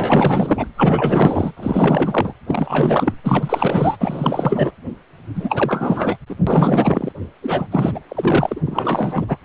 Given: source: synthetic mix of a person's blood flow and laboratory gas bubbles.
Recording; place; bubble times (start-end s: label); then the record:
Doppler ultrasound of blood flow; precordium
0.00-0.67 s: bubbles
0.77-1.52 s: bubbles
1.57-2.33 s: bubbles
2.46-3.12 s: bubbles
3.23-3.96 s: bubbles
4.00-4.71 s: bubbles
5.34-6.17 s: bubbles
6.29-6.35 s: bubbles
6.46-7.12 s: bubbles
7.42-7.67 s: bubbles
7.71-8.00 s: bubbles
8.08-8.62 s: bubbles
8.66-9.37 s: bubbles
From the record:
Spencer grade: 4 (maximum detectable bubble signal sounding continuously throughout systole and diastole of every cardiac period, and overriding the amplitude of the normal cardiac signals); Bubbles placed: anywhere in the cardiac cycle